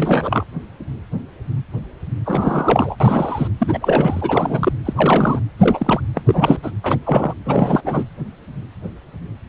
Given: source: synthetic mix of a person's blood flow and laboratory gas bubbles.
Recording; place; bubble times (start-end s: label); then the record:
Doppler ultrasound of blood flow; precordium
0.00-0.45 s: bubbles
2.25-2.96 s: bubbles
3.00-3.48 s: bubbles
3.58-4.72 s: bubbles
4.85-5.39 s: bubbles
5.57-6.01 s: bubbles
6.14-6.21 s: bubbles
6.26-6.58 s: bubbles
6.62-6.71 s: bubbles
6.83-6.98 s: bubbles
7.05-7.33 s: bubbles
7.46-7.81 s: bubbles
7.85-8.05 s: bubbles
From the record:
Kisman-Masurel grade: 333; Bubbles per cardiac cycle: rolling drumbeat, 9 or more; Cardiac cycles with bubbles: 50 to 99%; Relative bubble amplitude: loud (0.450 to 0.775); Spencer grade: 3 (all of the cardiac periods contain showers or single bubble signals, but not dominating or overriding the cardiac motion signals); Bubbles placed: anywhere in the cardiac cycle